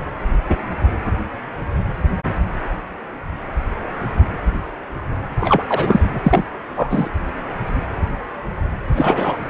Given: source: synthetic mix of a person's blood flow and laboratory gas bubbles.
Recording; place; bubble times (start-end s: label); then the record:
Doppler ultrasound of blood flow; precordium
5.40-5.63 s: bubbles
5.68-6.20 s: bubbles
6.23-6.45 s: bubbles
6.75-7.09 s: bubbles
8.96-9.40 s: bubbles
From the record:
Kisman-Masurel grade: 223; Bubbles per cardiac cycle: several, 3 to 8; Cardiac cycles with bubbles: 10 to 50%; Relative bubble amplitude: loud (0.450 to 0.775); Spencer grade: 2 (many but less than half of the cardiac periods contain bubble signals, singularly or in groups); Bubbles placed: anywhere in the cardiac cycle